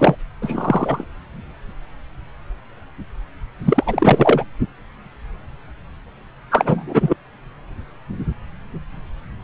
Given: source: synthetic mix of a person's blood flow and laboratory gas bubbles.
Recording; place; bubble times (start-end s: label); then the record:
Doppler ultrasound of blood flow; subclavian vein
0.00-0.15 s: bubbles
0.41-1.04 s: bubbles
3.64-4.46 s: bubbles
6.50-7.16 s: bubbles
From the record:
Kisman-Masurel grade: 223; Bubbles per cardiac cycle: several, 3 to 8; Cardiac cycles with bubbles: 10 to 50%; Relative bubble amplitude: loud (0.450 to 0.775); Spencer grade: 2 (many but less than half of the cardiac periods contain bubble signals, singularly or in groups); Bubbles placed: anywhere in the cardiac cycle